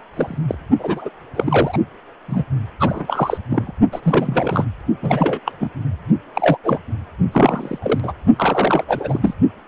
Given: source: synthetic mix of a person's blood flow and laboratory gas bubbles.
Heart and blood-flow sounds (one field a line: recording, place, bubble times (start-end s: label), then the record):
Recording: Doppler ultrasound of blood flow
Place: precordium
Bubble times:
0.13-0.39 s: bubbles
0.47-0.55 s: bubbles
0.79-1.09 s: bubbles
1.35-1.78 s: bubbles
2.28-2.44 s: bubbles
2.80-3.38 s: bubbles
3.50-3.72 s: bubbles
3.92-4.65 s: bubbles
5.02-5.39 s: bubbles
5.46-5.52 s: bubbles
5.60-5.70 s: bubbles
6.35-6.58 s: bubbles
6.63-6.79 s: bubbles
7.32-7.79 s: bubbles
7.82-8.00 s: bubbles
8.03-8.13 s: bubbles
8.36-8.84 s: bubbles
8.88-9.34 s: bubbles
From the record:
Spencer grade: 3 (all of the cardiac periods contain showers or single bubble signals, but not dominating or overriding the cardiac motion signals)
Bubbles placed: only in the low amplitude regions of the cardiac cycle